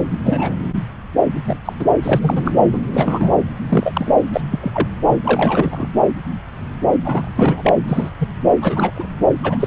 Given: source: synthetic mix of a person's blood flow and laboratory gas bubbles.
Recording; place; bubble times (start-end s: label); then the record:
Doppler ultrasound of blood flow; subclavian vein
0.24-0.56 s: bubbles
1.46-1.56 s: bubbles
1.65-1.73 s: bubbles
1.79-1.85 s: bubbles
2.02-2.53 s: bubbles
2.73-2.78 s: bubbles
2.94-3.30 s: bubbles
3.69-4.14 s: bubbles
4.32-4.41 s: bubbles
4.51-4.88 s: bubbles
5.07-5.17 s: bubbles
5.23-5.88 s: bubbles
7.04-7.73 s: bubbles
7.88-8.09 s: bubbles
8.19-8.29 s: bubbles
8.61-8.92 s: bubbles
8.96-9.06 s: bubbles
9.43-9.57 s: bubbles
9.59-9.67 s: bubbles
From the record:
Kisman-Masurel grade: 232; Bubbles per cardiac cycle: several, 3 to 8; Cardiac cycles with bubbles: 50 to 99%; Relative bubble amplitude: moderate (0.250 to 0.450); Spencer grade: 3 (all of the cardiac periods contain showers or single bubble signals, but not dominating or overriding the cardiac motion signals); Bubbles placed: anywhere in the cardiac cycle